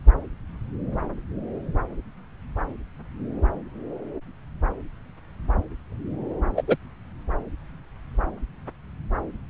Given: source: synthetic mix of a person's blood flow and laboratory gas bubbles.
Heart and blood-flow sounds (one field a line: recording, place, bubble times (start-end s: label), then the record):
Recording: Doppler ultrasound of blood flow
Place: subclavian vein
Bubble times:
6.57-6.62 s: bubbles
6.67-6.76 s: bubbles
From the record:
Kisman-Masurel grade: 113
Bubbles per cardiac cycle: 1 to 2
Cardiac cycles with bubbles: 1 to 10%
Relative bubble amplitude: loud (0.450 to 0.775)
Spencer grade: 1 (occasional bubble signal discernible with the cardiac motion signal, with majority of cardiac periods free of bubbles)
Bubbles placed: anywhere in the cardiac cycle